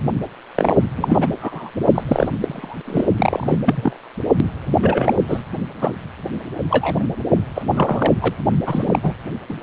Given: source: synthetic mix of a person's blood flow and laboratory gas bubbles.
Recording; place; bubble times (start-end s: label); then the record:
Doppler ultrasound of blood flow; precordium
0.55-0.76 s: bubbles
0.96-1.28 s: bubbles
1.41-1.70 s: bubbles
1.94-2.04 s: bubbles
2.08-2.29 s: bubbles
2.39-2.77 s: bubbles
2.85-3.05 s: bubbles
3.17-3.58 s: bubbles
3.65-3.96 s: bubbles
4.70-4.78 s: bubbles
4.82-5.15 s: bubbles
5.28-5.43 s: bubbles
5.82-5.93 s: bubbles
6.70-7.04 s: bubbles
7.55-7.63 s: bubbles
7.75-8.13 s: bubbles
8.21-8.35 s: bubbles
8.65-8.99 s: bubbles
9.03-9.13 s: bubbles
9.49-9.57 s: bubbles
From the record:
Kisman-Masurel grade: 243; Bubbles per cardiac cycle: several, 3 to 8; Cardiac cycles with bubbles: 100%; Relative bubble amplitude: loud (0.450 to 0.775); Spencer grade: 3 (all of the cardiac periods contain showers or single bubble signals, but not dominating or overriding the cardiac motion signals); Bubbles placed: only in the low amplitude regions of the cardiac cycle